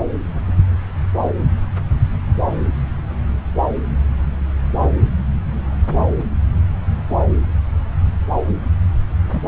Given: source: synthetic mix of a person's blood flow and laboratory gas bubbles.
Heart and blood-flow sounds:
Doppler ultrasound of blood flow; subclavian vein
9.31-9.42 s: bubbles
From the record:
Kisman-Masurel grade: 111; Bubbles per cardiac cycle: 1 to 2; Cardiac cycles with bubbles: 1 to 10%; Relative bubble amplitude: barely perceptible (0.100 to 0.250); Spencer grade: 1 (occasional bubble signal discernible with the cardiac motion signal, with majority of cardiac periods free of bubbles); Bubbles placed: anywhere in the cardiac cycle

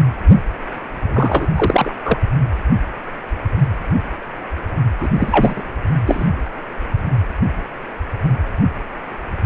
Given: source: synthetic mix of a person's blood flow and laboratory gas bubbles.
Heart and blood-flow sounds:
Doppler ultrasound of blood flow; precordium
1.03-1.47 s: bubbles
1.55-1.92 s: bubbles
2.04-2.17 s: bubbles
4.99-5.09 s: bubbles
5.13-5.63 s: bubbles
6.06-6.28 s: bubbles
From the record:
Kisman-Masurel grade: 223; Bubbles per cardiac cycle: several, 3 to 8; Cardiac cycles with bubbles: 10 to 50%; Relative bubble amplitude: loud (0.450 to 0.775); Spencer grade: 2 (many but less than half of the cardiac periods contain bubble signals, singularly or in groups); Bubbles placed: anywhere in the cardiac cycle

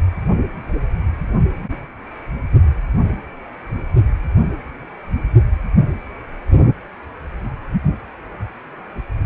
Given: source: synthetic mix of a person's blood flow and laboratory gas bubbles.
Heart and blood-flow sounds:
Doppler ultrasound of blood flow; precordium
no bubbles
From the record:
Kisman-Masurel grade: 000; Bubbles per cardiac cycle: 0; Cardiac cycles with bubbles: 0%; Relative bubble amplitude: no bubbles discernible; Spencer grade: 0 (complete lack of bubble signals)

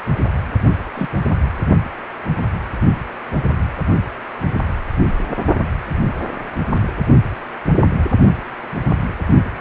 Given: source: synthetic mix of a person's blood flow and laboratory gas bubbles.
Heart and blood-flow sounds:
Doppler ultrasound of blood flow; precordium
0.95-1.08 s: bubbles
From the record:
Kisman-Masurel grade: 122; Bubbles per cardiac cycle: 1 to 2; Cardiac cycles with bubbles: 10 to 50%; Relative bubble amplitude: moderate (0.250 to 0.450); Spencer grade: 2 (many but less than half of the cardiac periods contain bubble signals, singularly or in groups); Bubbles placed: only in the low amplitude regions of the cardiac cycle

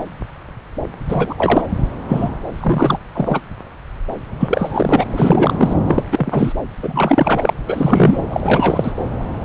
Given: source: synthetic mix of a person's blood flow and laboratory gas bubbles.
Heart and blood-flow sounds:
Doppler ultrasound of blood flow; subclavian vein
1.08-1.35 s: bubbles
1.38-1.62 s: bubbles
2.08-2.30 s: bubbles
2.58-2.99 s: bubbles
3.13-3.40 s: bubbles
4.39-5.05 s: bubbles
5.10-5.75 s: bubbles
5.85-6.03 s: bubbles
6.11-6.52 s: bubbles
6.82-7.54 s: bubbles
7.67-8.23 s: bubbles
8.29-8.92 s: bubbles
From the record:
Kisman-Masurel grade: 333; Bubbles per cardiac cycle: rolling drumbeat, 9 or more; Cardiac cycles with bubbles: 50 to 99%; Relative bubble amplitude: loud (0.450 to 0.775); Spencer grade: 3 (all of the cardiac periods contain showers or single bubble signals, but not dominating or overriding the cardiac motion signals); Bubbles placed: anywhere in the cardiac cycle

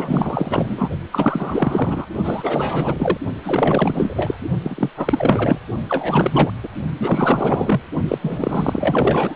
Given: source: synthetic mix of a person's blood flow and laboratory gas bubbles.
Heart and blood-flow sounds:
Doppler ultrasound of blood flow; precordium
0.00-0.89 s: bubbles
1.11-2.07 s: bubbles
2.24-3.17 s: bubbles
3.43-4.39 s: bubbles
4.62-4.90 s: bubbles
4.96-5.61 s: bubbles
5.89-6.50 s: bubbles
6.63-6.68 s: bubbles
6.99-7.81 s: bubbles
8.08-8.18 s: bubbles
8.22-9.35 s: bubbles
From the record:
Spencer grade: 4 (maximum detectable bubble signal sounding continuously throughout systole and diastole of every cardiac period, and overriding the amplitude of the normal cardiac signals); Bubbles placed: only in the low amplitude regions of the cardiac cycle

